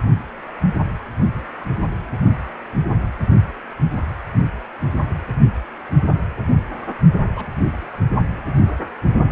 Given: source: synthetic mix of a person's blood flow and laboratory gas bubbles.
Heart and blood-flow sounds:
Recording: Doppler ultrasound of blood flow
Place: precordium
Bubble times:
7.35-7.51 s: bubbles
From the record:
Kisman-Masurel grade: 111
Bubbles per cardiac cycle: 1 to 2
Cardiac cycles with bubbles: 1 to 10%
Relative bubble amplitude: barely perceptible (0.100 to 0.250)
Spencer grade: 1 (occasional bubble signal discernible with the cardiac motion signal, with majority of cardiac periods free of bubbles)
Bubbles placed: only in the low amplitude regions of the cardiac cycle

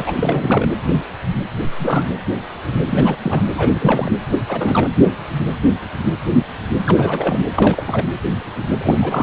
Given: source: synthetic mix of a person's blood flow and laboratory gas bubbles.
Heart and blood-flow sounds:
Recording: Doppler ultrasound of blood flow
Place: precordium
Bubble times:
0.00-0.12 s: bubbles
0.17-0.71 s: bubbles
1.78-2.10 s: bubbles
2.89-3.16 s: bubbles
3.23-3.45 s: bubbles
3.54-4.11 s: bubbles
4.48-4.89 s: bubbles
6.83-7.38 s: bubbles
7.56-7.83 s: bubbles
7.86-8.10 s: bubbles
8.78-9.23 s: bubbles
From the record:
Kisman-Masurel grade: 332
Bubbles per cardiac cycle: rolling drumbeat, 9 or more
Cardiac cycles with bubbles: 50 to 99%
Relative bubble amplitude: moderate (0.250 to 0.450)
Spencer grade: 3 (all of the cardiac periods contain showers or single bubble signals, but not dominating or overriding the cardiac motion signals)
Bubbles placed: anywhere in the cardiac cycle

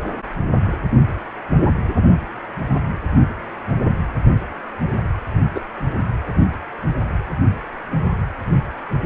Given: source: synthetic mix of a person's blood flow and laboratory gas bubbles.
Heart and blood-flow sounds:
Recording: Doppler ultrasound of blood flow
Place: precordium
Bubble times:
5.54-5.60 s: bubbles
From the record:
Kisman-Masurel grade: 113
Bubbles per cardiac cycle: 1 to 2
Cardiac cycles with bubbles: 1 to 10%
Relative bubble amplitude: loud (0.450 to 0.775)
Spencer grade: 1 (occasional bubble signal discernible with the cardiac motion signal, with majority of cardiac periods free of bubbles)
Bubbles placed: anywhere in the cardiac cycle

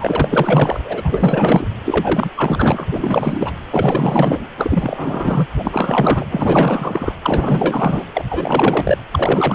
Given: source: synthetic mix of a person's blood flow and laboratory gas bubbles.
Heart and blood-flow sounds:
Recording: Doppler ultrasound of blood flow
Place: precordium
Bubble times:
0.00-0.80 s: bubbles
0.84-1.71 s: bubbles
1.85-2.30 s: bubbles
2.35-2.87 s: bubbles
2.92-3.54 s: bubbles
3.71-4.48 s: bubbles
4.57-5.46 s: bubbles
5.56-6.25 s: bubbles
6.30-7.12 s: bubbles
7.22-8.06 s: bubbles
8.14-8.23 s: bubbles
8.29-8.97 s: bubbles
9.11-9.55 s: bubbles
From the record:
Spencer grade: 4 (maximum detectable bubble signal sounding continuously throughout systole and diastole of every cardiac period, and overriding the amplitude of the normal cardiac signals)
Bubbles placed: anywhere in the cardiac cycle

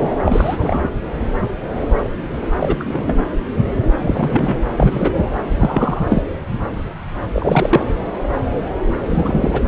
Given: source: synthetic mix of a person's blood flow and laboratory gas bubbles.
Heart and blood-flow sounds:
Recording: Doppler ultrasound of blood flow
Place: subclavian vein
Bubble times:
0.00-0.17 s: bubbles
0.24-0.89 s: bubbles
2.59-2.77 s: bubbles
2.79-3.15 s: bubbles
3.99-4.58 s: bubbles
4.78-5.11 s: bubbles
5.17-5.25 s: bubbles
5.59-6.01 s: bubbles
6.08-6.22 s: bubbles
7.33-7.87 s: bubbles
9.06-9.61 s: bubbles
From the record:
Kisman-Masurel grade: 233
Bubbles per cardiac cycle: several, 3 to 8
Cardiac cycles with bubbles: 50 to 99%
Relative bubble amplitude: loud (0.450 to 0.775)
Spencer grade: 3 (all of the cardiac periods contain showers or single bubble signals, but not dominating or overriding the cardiac motion signals)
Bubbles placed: anywhere in the cardiac cycle

